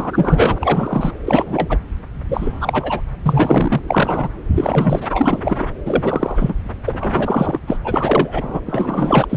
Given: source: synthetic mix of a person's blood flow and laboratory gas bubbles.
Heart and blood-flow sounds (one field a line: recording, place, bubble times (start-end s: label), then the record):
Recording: Doppler ultrasound of blood flow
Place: subclavian vein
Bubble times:
0.00-1.11 s: bubbles
1.27-1.78 s: bubbles
2.29-3.01 s: bubbles
3.22-3.81 s: bubbles
3.88-4.29 s: bubbles
4.54-5.08 s: bubbles
5.11-5.71 s: bubbles
5.85-6.54 s: bubbles
6.85-7.58 s: bubbles
7.67-7.77 s: bubbles
7.85-8.60 s: bubbles
8.66-9.25 s: bubbles
9.29-9.37 s: bubbles
From the record:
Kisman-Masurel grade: 343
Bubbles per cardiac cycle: rolling drumbeat, 9 or more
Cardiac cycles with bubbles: 100%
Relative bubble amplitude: loud (0.450 to 0.775)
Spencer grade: 3 (all of the cardiac periods contain showers or single bubble signals, but not dominating or overriding the cardiac motion signals)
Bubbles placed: anywhere in the cardiac cycle